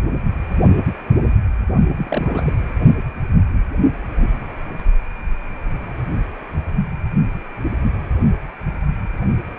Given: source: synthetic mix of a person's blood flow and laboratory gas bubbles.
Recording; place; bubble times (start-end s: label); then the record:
Doppler ultrasound of blood flow; precordium
1.97-2.52 s: bubbles
2.55-2.62 s: bubbles
From the record:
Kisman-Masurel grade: 211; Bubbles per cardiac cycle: several, 3 to 8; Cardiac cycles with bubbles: 1 to 10%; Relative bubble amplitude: barely perceptible (0.100 to 0.250); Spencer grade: 1 (occasional bubble signal discernible with the cardiac motion signal, with majority of cardiac periods free of bubbles); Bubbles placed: only in the low amplitude regions of the cardiac cycle